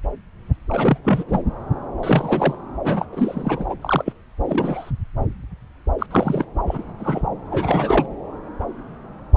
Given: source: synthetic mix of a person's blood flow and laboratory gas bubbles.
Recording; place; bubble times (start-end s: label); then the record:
Doppler ultrasound of blood flow; subclavian vein
0.69-0.98 s: bubbles
1.03-1.24 s: bubbles
1.27-1.44 s: bubbles
2.03-2.55 s: bubbles
2.84-3.06 s: bubbles
3.12-3.66 s: bubbles
3.69-3.75 s: bubbles
3.81-4.13 s: bubbles
4.45-4.91 s: bubbles
5.98-6.06 s: bubbles
6.10-6.45 s: bubbles
6.67-6.84 s: bubbles
6.99-7.22 s: bubbles
7.50-8.06 s: bubbles
From the record:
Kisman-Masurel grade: 233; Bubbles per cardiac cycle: several, 3 to 8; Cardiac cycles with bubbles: 50 to 99%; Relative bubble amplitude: loud (0.450 to 0.775); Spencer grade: 3 (all of the cardiac periods contain showers or single bubble signals, but not dominating or overriding the cardiac motion signals); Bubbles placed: anywhere in the cardiac cycle